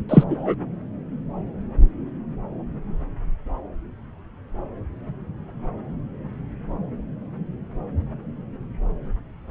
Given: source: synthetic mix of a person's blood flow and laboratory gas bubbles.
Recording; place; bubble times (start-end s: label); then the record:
Doppler ultrasound of blood flow; subclavian vein
0.09-0.23 s: bubbles
0.29-0.54 s: bubbles
From the record:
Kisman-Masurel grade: 213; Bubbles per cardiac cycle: several, 3 to 8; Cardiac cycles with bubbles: 1 to 10%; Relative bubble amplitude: loud (0.450 to 0.775); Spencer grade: 1 (occasional bubble signal discernible with the cardiac motion signal, with majority of cardiac periods free of bubbles); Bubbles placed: anywhere in the cardiac cycle